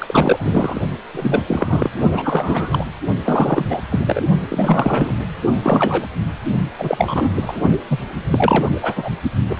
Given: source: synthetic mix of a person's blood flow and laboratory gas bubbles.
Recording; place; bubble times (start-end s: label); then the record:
Doppler ultrasound of blood flow; precordium
0.00-0.81 s: bubbles
1.13-1.42 s: bubbles
1.47-1.90 s: bubbles
2.11-2.85 s: bubbles
3.24-3.65 s: bubbles
3.69-3.81 s: bubbles
3.90-4.21 s: bubbles
4.49-5.15 s: bubbles
5.62-6.06 s: bubbles
6.78-7.62 s: bubbles
7.89-7.99 s: bubbles
8.31-9.11 s: bubbles
9.49-9.60 s: bubbles
From the record:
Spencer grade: 3 (all of the cardiac periods contain showers or single bubble signals, but not dominating or overriding the cardiac motion signals); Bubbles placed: only in the low amplitude regions of the cardiac cycle